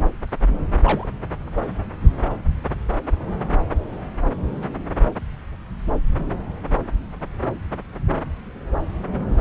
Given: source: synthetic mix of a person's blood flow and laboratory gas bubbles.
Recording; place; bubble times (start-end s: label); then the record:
Doppler ultrasound of blood flow; subclavian vein
0.83-1.08 s: bubbles
From the record:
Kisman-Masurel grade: 111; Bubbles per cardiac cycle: 1 to 2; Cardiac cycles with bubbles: 1 to 10%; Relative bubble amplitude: barely perceptible (0.100 to 0.250); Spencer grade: 1 (occasional bubble signal discernible with the cardiac motion signal, with majority of cardiac periods free of bubbles); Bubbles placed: anywhere in the cardiac cycle